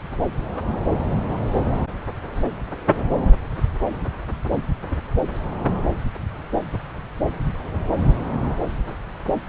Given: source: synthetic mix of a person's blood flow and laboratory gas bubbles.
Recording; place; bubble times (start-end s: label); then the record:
Doppler ultrasound of blood flow; subclavian vein
no bubbles
From the record:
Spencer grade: 0 (complete lack of bubble signals)